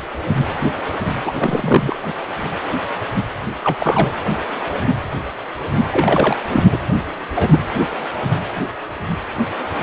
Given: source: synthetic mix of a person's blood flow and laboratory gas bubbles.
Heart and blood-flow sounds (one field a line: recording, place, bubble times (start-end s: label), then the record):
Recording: Doppler ultrasound of blood flow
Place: precordium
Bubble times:
1.24-1.32 s: bubbles
1.37-1.95 s: bubbles
3.63-3.77 s: bubbles
3.80-4.12 s: bubbles
5.90-6.37 s: bubbles
6.53-6.63 s: bubbles
6.72-6.79 s: bubbles
7.35-7.59 s: bubbles
From the record:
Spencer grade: 2 (many but less than half of the cardiac periods contain bubble signals, singularly or in groups)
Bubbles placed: anywhere in the cardiac cycle